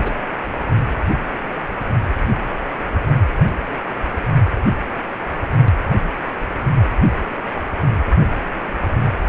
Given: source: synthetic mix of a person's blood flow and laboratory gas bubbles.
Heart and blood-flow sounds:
Doppler ultrasound of blood flow; precordium
0.03-0.12 s: bubbles
From the record:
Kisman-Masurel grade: 212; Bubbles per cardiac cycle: several, 3 to 8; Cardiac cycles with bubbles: 1 to 10%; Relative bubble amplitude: moderate (0.250 to 0.450); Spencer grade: 1 (occasional bubble signal discernible with the cardiac motion signal, with majority of cardiac periods free of bubbles); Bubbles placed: only in the low amplitude regions of the cardiac cycle

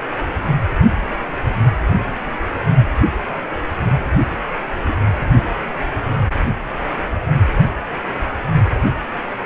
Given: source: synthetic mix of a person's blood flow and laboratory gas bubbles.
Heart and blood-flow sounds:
Doppler ultrasound of blood flow; precordium
4.88-4.96 s: bubbles
From the record:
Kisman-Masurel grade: 111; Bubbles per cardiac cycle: 1 to 2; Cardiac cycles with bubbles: 1 to 10%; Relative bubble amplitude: barely perceptible (0.100 to 0.250); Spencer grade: 1 (occasional bubble signal discernible with the cardiac motion signal, with majority of cardiac periods free of bubbles); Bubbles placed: anywhere in the cardiac cycle

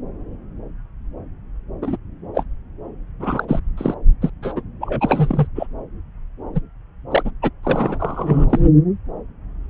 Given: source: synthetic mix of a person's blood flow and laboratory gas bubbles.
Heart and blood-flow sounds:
Doppler ultrasound of blood flow; subclavian vein
1.81-1.97 s: bubbles
2.35-2.44 s: bubbles
3.19-3.45 s: bubbles
3.48-3.60 s: bubbles
3.77-3.94 s: bubbles
4.21-4.30 s: bubbles
4.42-4.53 s: bubbles
4.55-4.61 s: bubbles
4.80-5.47 s: bubbles
5.55-5.67 s: bubbles
6.54-6.60 s: bubbles
7.10-7.30 s: bubbles
7.42-7.50 s: bubbles
7.63-8.45 s: bubbles
8.50-8.60 s: bubbles
From the record:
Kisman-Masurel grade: 232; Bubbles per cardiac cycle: several, 3 to 8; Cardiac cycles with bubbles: 50 to 99%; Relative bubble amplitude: moderate (0.250 to 0.450); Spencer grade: 3 (all of the cardiac periods contain showers or single bubble signals, but not dominating or overriding the cardiac motion signals); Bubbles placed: anywhere in the cardiac cycle

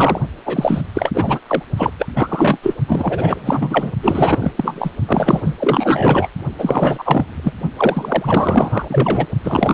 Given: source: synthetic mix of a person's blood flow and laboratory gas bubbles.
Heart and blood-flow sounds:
Doppler ultrasound of blood flow; precordium
0.00-0.21 s: bubbles
0.46-0.81 s: bubbles
0.94-1.10 s: bubbles
1.14-1.39 s: bubbles
1.47-1.63 s: bubbles
1.77-1.91 s: bubbles
1.99-2.06 s: bubbles
2.15-2.58 s: bubbles
2.62-2.75 s: bubbles
2.88-3.92 s: bubbles
4.03-4.52 s: bubbles
4.57-4.91 s: bubbles
5.08-5.54 s: bubbles
5.59-6.28 s: bubbles
6.58-7.53 s: bubbles
7.77-9.26 s: bubbles
9.43-9.74 s: bubbles
From the record:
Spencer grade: 4 (maximum detectable bubble signal sounding continuously throughout systole and diastole of every cardiac period, and overriding the amplitude of the normal cardiac signals); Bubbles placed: only in the low amplitude regions of the cardiac cycle

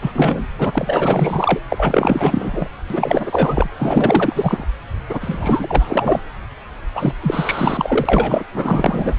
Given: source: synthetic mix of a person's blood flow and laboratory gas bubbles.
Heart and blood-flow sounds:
Doppler ultrasound of blood flow; subclavian vein
0.01-0.46 s: bubbles
0.58-1.59 s: bubbles
1.70-2.68 s: bubbles
2.90-3.69 s: bubbles
3.77-4.64 s: bubbles
5.09-6.21 s: bubbles
6.94-7.12 s: bubbles
7.21-8.44 s: bubbles
8.54-9.15 s: bubbles
From the record:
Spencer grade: 4 (maximum detectable bubble signal sounding continuously throughout systole and diastole of every cardiac period, and overriding the amplitude of the normal cardiac signals); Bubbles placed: anywhere in the cardiac cycle

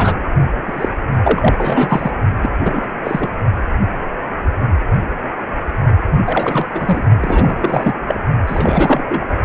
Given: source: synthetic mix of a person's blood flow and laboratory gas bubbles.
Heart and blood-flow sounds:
Doppler ultrasound of blood flow; precordium
0.00-0.16 s: bubbles
0.67-0.89 s: bubbles
1.24-1.55 s: bubbles
1.58-2.11 s: bubbles
2.42-2.50 s: bubbles
2.64-2.87 s: bubbles
3.04-3.30 s: bubbles
6.09-6.22 s: bubbles
6.25-7.04 s: bubbles
7.20-7.95 s: bubbles
8.07-8.21 s: bubbles
8.46-9.25 s: bubbles
From the record:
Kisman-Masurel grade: 332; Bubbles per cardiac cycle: rolling drumbeat, 9 or more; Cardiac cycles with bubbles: 50 to 99%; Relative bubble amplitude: moderate (0.250 to 0.450); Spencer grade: 3 (all of the cardiac periods contain showers or single bubble signals, but not dominating or overriding the cardiac motion signals); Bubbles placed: only in the low amplitude regions of the cardiac cycle

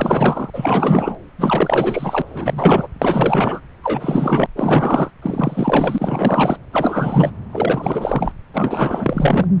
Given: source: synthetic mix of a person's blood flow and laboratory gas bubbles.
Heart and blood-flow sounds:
Doppler ultrasound of blood flow; subclavian vein
0.00-0.50 s: bubbles
0.53-1.15 s: bubbles
1.39-2.22 s: bubbles
2.27-2.88 s: bubbles
3.02-3.60 s: bubbles
3.82-4.46 s: bubbles
4.56-5.11 s: bubbles
5.22-6.58 s: bubbles
6.72-7.31 s: bubbles
7.53-8.32 s: bubbles
8.54-9.46 s: bubbles
From the record:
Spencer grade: 4 (maximum detectable bubble signal sounding continuously throughout systole and diastole of every cardiac period, and overriding the amplitude of the normal cardiac signals); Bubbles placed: anywhere in the cardiac cycle

